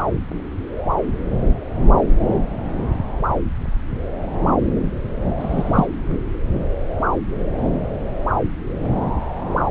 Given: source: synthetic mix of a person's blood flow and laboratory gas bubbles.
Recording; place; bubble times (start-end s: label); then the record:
Doppler ultrasound of blood flow; subclavian vein
5.40-5.86 s: bubbles
From the record:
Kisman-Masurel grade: 113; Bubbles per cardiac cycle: 1 to 2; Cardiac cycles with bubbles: 1 to 10%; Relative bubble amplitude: loud (0.450 to 0.775); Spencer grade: 1 (occasional bubble signal discernible with the cardiac motion signal, with majority of cardiac periods free of bubbles); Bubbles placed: anywhere in the cardiac cycle